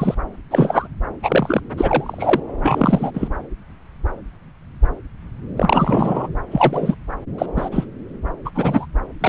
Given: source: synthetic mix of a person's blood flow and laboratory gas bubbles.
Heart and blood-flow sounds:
Doppler ultrasound of blood flow; subclavian vein
0.00-0.14 s: bubbles
0.51-0.88 s: bubbles
1.23-1.60 s: bubbles
1.77-2.40 s: bubbles
2.62-3.11 s: bubbles
3.14-3.28 s: bubbles
5.56-6.28 s: bubbles
6.51-6.95 s: bubbles
7.38-7.46 s: bubbles
7.56-7.87 s: bubbles
8.45-8.49 s: bubbles
8.54-8.86 s: bubbles
9.21-9.29 s: bubbles
From the record:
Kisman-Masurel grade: 233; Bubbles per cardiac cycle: several, 3 to 8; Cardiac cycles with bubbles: 50 to 99%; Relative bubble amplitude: loud (0.450 to 0.775); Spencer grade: 3 (all of the cardiac periods contain showers or single bubble signals, but not dominating or overriding the cardiac motion signals); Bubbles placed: anywhere in the cardiac cycle

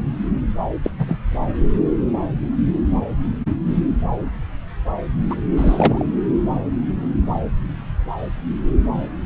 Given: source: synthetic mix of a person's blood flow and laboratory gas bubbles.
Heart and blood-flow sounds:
Doppler ultrasound of blood flow; subclavian vein
0.83-0.91 s: bubbles
0.98-1.18 s: bubbles
5.30-5.36 s: bubbles
5.57-6.05 s: bubbles
From the record:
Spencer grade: 2 (many but less than half of the cardiac periods contain bubble signals, singularly or in groups); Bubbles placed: anywhere in the cardiac cycle

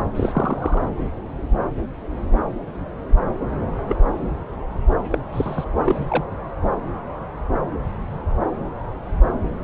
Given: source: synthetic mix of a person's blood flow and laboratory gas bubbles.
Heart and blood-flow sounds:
Doppler ultrasound of blood flow; subclavian vein
0.14-0.82 s: bubbles
3.89-3.95 s: bubbles
5.11-5.19 s: bubbles
5.32-5.64 s: bubbles
5.84-6.25 s: bubbles
From the record:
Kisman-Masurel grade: 122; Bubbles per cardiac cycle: 1 to 2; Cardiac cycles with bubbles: 10 to 50%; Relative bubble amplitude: moderate (0.250 to 0.450); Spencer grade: 2 (many but less than half of the cardiac periods contain bubble signals, singularly or in groups); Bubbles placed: anywhere in the cardiac cycle

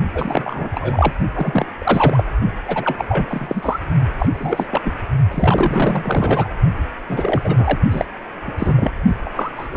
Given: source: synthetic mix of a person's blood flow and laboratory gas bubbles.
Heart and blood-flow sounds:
Doppler ultrasound of blood flow; precordium
0.14-0.69 s: bubbles
0.72-1.14 s: bubbles
1.33-1.66 s: bubbles
1.80-2.23 s: bubbles
2.66-3.05 s: bubbles
3.08-3.79 s: bubbles
4.19-4.29 s: bubbles
4.32-4.94 s: bubbles
5.31-6.49 s: bubbles
7.08-7.79 s: bubbles
7.90-8.05 s: bubbles
8.46-8.54 s: bubbles
8.57-8.91 s: bubbles
9.25-9.29 s: bubbles
9.36-9.51 s: bubbles
9.56-9.68 s: bubbles
9.71-9.77 s: bubbles
From the record:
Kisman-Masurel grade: 342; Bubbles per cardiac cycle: rolling drumbeat, 9 or more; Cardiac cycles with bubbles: 100%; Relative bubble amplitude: moderate (0.250 to 0.450); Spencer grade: 3 (all of the cardiac periods contain showers or single bubble signals, but not dominating or overriding the cardiac motion signals); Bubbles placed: only in the low amplitude regions of the cardiac cycle

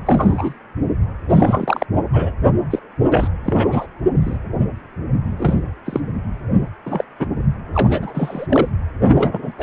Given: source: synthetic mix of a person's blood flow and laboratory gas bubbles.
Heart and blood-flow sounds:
Doppler ultrasound of blood flow; precordium
0.06-0.54 s: bubbles
1.29-1.85 s: bubbles
2.12-2.32 s: bubbles
2.70-2.79 s: bubbles
3.10-3.28 s: bubbles
3.45-3.86 s: bubbles
4.21-4.38 s: bubbles
5.37-5.58 s: bubbles
5.84-6.00 s: bubbles
6.85-7.04 s: bubbles
7.19-7.26 s: bubbles
7.73-8.68 s: bubbles
9.08-9.52 s: bubbles
9.58-9.63 s: bubbles
From the record:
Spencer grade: 3 (all of the cardiac periods contain showers or single bubble signals, but not dominating or overriding the cardiac motion signals); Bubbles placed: anywhere in the cardiac cycle

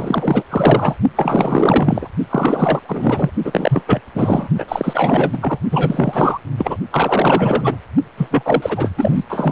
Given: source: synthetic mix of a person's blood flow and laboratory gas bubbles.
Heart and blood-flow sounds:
Doppler ultrasound of blood flow; precordium
0.00-0.44 s: bubbles
0.50-0.96 s: bubbles
1.16-2.08 s: bubbles
2.29-2.79 s: bubbles
2.88-3.30 s: bubbles
3.44-3.83 s: bubbles
3.86-4.01 s: bubbles
4.14-4.48 s: bubbles
4.58-4.65 s: bubbles
4.68-5.58 s: bubbles
5.71-6.38 s: bubbles
6.58-6.78 s: bubbles
6.91-7.76 s: bubbles
8.18-8.91 s: bubbles
8.97-9.24 s: bubbles
9.29-9.52 s: bubbles
From the record:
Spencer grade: 4 (maximum detectable bubble signal sounding continuously throughout systole and diastole of every cardiac period, and overriding the amplitude of the normal cardiac signals); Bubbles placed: only in the low amplitude regions of the cardiac cycle

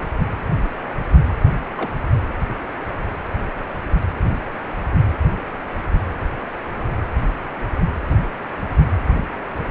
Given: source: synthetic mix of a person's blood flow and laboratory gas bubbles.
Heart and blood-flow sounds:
Doppler ultrasound of blood flow; precordium
1.27-1.35 s: bubbles
1.77-1.90 s: bubbles
From the record:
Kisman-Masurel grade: 111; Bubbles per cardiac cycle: 1 to 2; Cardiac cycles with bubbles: 1 to 10%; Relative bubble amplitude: barely perceptible (0.100 to 0.250); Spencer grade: 1 (occasional bubble signal discernible with the cardiac motion signal, with majority of cardiac periods free of bubbles); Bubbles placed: anywhere in the cardiac cycle

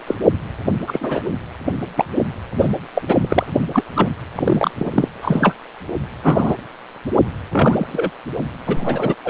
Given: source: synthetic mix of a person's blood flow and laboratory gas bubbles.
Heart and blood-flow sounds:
Doppler ultrasound of blood flow; precordium
0.07-0.15 s: bubbles
0.86-1.23 s: bubbles
1.97-2.04 s: bubbles
2.60-2.69 s: bubbles
2.94-3.02 s: bubbles
3.08-3.52 s: bubbles
3.73-3.84 s: bubbles
3.95-4.11 s: bubbles
4.35-4.71 s: bubbles
4.78-5.08 s: bubbles
5.22-5.54 s: bubbles
6.23-6.57 s: bubbles
7.52-8.11 s: bubbles
8.65-9.14 s: bubbles
9.23-9.30 s: bubbles
From the record:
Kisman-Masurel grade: 243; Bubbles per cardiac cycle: several, 3 to 8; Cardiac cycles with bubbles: 100%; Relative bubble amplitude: loud (0.450 to 0.775); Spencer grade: 3 (all of the cardiac periods contain showers or single bubble signals, but not dominating or overriding the cardiac motion signals); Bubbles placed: only in the low amplitude regions of the cardiac cycle

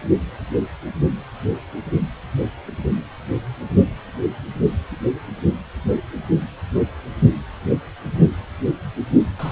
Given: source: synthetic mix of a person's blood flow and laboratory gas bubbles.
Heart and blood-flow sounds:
Doppler ultrasound of blood flow; precordium
9.39-9.52 s: bubbles
From the record:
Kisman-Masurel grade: 222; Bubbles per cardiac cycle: several, 3 to 8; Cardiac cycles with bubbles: 10 to 50%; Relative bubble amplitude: moderate (0.250 to 0.450); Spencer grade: 2 (many but less than half of the cardiac periods contain bubble signals, singularly or in groups); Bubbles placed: anywhere in the cardiac cycle

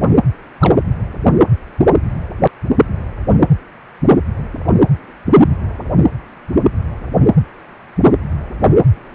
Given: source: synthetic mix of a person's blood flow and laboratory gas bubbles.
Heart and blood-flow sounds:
Doppler ultrasound of blood flow; precordium
0.59-0.74 s: bubbles
From the record:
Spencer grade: 1 (occasional bubble signal discernible with the cardiac motion signal, with majority of cardiac periods free of bubbles); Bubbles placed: anywhere in the cardiac cycle

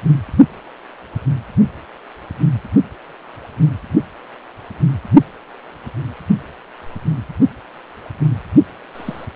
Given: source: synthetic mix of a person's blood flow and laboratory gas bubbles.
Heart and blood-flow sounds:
Doppler ultrasound of blood flow; precordium
8.95-9.25 s: bubbles
From the record:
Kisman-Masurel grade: 112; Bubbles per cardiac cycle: 1 to 2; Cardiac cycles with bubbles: 1 to 10%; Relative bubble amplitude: moderate (0.250 to 0.450); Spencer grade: 1 (occasional bubble signal discernible with the cardiac motion signal, with majority of cardiac periods free of bubbles); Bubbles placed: anywhere in the cardiac cycle

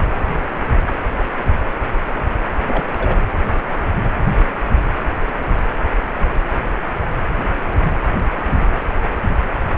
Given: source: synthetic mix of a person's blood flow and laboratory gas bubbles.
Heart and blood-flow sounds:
Doppler ultrasound of blood flow; precordium
2.68-2.83 s: bubbles
2.90-3.20 s: bubbles
From the record:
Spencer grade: 1 (occasional bubble signal discernible with the cardiac motion signal, with majority of cardiac periods free of bubbles); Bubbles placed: anywhere in the cardiac cycle

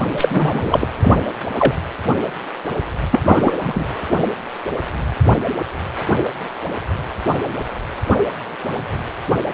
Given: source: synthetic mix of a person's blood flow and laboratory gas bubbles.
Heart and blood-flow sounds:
Doppler ultrasound of blood flow; precordium
0.17-0.88 s: bubbles
1.01-1.17 s: bubbles
1.59-1.74 s: bubbles
3.11-3.58 s: bubbles
3.63-3.84 s: bubbles
From the record:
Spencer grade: 2 (many but less than half of the cardiac periods contain bubble signals, singularly or in groups); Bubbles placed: anywhere in the cardiac cycle

